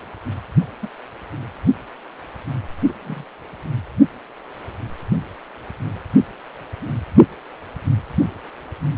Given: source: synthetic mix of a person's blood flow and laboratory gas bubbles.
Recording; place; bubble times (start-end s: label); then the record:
Doppler ultrasound of blood flow; precordium
0.81-0.89 s: bubbles
2.87-2.92 s: bubbles
3.00-3.25 s: bubbles
From the record:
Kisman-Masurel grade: 121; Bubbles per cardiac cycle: 1 to 2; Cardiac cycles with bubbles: 10 to 50%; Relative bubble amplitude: barely perceptible (0.100 to 0.250); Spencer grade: 2 (many but less than half of the cardiac periods contain bubble signals, singularly or in groups); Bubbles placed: anywhere in the cardiac cycle